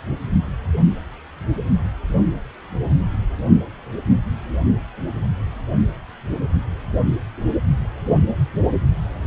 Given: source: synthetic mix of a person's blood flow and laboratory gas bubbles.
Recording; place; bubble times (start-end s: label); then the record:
Doppler ultrasound of blood flow; precordium
no bubbles
From the record:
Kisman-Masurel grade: 000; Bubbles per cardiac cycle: 0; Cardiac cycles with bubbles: 0%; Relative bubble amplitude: no bubbles discernible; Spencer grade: 0 (complete lack of bubble signals)